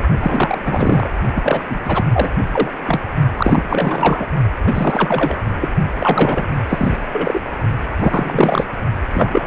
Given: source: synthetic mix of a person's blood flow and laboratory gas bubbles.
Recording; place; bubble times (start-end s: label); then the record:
Doppler ultrasound of blood flow; precordium
0.19-0.58 s: bubbles
0.65-1.09 s: bubbles
1.34-1.62 s: bubbles
1.70-1.79 s: bubbles
1.84-2.04 s: bubbles
2.12-2.30 s: bubbles
2.52-2.71 s: bubbles
2.87-3.00 s: bubbles
3.37-4.28 s: bubbles
4.63-5.42 s: bubbles
5.60-5.68 s: bubbles
5.96-6.48 s: bubbles
6.68-6.97 s: bubbles
7.11-7.41 s: bubbles
8.00-8.65 s: bubbles
9.13-9.47 s: bubbles
From the record:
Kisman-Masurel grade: 343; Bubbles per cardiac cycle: rolling drumbeat, 9 or more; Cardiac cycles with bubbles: 100%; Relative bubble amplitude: loud (0.450 to 0.775); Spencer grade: 3 (all of the cardiac periods contain showers or single bubble signals, but not dominating or overriding the cardiac motion signals); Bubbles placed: only in the low amplitude regions of the cardiac cycle